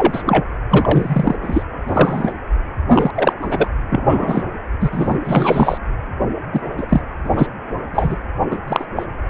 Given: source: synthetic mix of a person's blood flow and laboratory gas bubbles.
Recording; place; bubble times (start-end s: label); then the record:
Doppler ultrasound of blood flow; precordium
0.00-0.22 s: bubbles
0.25-0.44 s: bubbles
0.70-1.36 s: bubbles
1.43-1.63 s: bubbles
1.88-2.33 s: bubbles
2.88-3.11 s: bubbles
3.14-3.33 s: bubbles
3.41-3.70 s: bubbles
3.89-4.43 s: bubbles
4.80-5.18 s: bubbles
5.23-5.77 s: bubbles
6.52-6.60 s: bubbles
6.77-6.87 s: bubbles
6.89-7.01 s: bubbles
7.24-7.47 s: bubbles
7.92-8.16 s: bubbles
8.50-8.58 s: bubbles
8.67-8.85 s: bubbles
8.96-9.06 s: bubbles
From the record:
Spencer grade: 3 (all of the cardiac periods contain showers or single bubble signals, but not dominating or overriding the cardiac motion signals); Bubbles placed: anywhere in the cardiac cycle